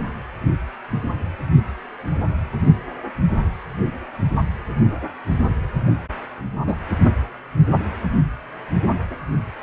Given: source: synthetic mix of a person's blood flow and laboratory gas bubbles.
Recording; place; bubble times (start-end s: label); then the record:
Doppler ultrasound of blood flow; precordium
6.67-6.75 s: bubbles
From the record:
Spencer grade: 1 (occasional bubble signal discernible with the cardiac motion signal, with majority of cardiac periods free of bubbles); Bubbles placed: anywhere in the cardiac cycle